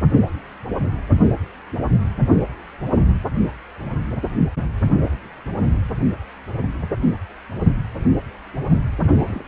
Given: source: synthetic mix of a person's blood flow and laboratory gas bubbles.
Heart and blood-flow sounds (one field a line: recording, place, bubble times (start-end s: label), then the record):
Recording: Doppler ultrasound of blood flow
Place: precordium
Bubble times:
9.04-9.43 s: bubbles
From the record:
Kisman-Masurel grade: 111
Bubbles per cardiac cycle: 1 to 2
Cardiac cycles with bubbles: 1 to 10%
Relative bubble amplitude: barely perceptible (0.100 to 0.250)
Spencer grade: 1 (occasional bubble signal discernible with the cardiac motion signal, with majority of cardiac periods free of bubbles)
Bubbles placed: only in the low amplitude regions of the cardiac cycle